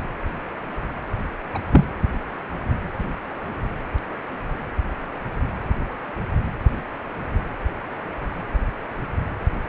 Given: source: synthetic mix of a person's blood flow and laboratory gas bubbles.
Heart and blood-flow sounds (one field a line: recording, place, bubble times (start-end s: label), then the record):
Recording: Doppler ultrasound of blood flow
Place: precordium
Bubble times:
1.54-1.59 s: bubbles
1.71-1.84 s: bubbles
From the record:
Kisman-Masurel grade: 212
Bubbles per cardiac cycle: several, 3 to 8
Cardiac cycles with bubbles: 1 to 10%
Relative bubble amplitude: moderate (0.250 to 0.450)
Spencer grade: 1 (occasional bubble signal discernible with the cardiac motion signal, with majority of cardiac periods free of bubbles)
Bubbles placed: anywhere in the cardiac cycle